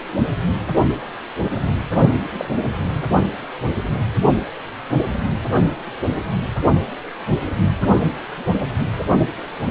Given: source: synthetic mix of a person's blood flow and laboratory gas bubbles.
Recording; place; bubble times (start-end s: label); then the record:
Doppler ultrasound of blood flow; precordium
2.12-2.20 s: bubbles
2.37-2.49 s: bubbles
From the record:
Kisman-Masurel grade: 121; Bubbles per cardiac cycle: 1 to 2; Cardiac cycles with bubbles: 10 to 50%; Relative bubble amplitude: barely perceptible (0.100 to 0.250); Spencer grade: 2 (many but less than half of the cardiac periods contain bubble signals, singularly or in groups); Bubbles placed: only in the low amplitude regions of the cardiac cycle